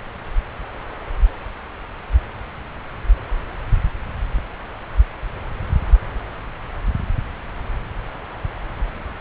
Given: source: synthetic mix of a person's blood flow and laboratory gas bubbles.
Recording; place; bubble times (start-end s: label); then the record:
Doppler ultrasound of blood flow; subclavian vein
no bubbles
From the record:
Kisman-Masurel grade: 000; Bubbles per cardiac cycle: 0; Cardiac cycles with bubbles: 0%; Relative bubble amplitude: no bubbles discernible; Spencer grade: 0 (complete lack of bubble signals)